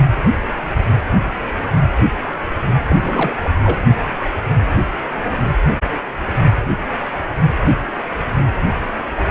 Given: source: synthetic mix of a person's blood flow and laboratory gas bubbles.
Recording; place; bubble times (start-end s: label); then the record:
Doppler ultrasound of blood flow; precordium
2.89-3.36 s: bubbles
3.43-3.49 s: bubbles
3.63-3.77 s: bubbles
From the record:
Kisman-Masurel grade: 222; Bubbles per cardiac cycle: several, 3 to 8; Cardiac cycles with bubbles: 10 to 50%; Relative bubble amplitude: moderate (0.250 to 0.450); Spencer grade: 2 (many but less than half of the cardiac periods contain bubble signals, singularly or in groups); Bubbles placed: anywhere in the cardiac cycle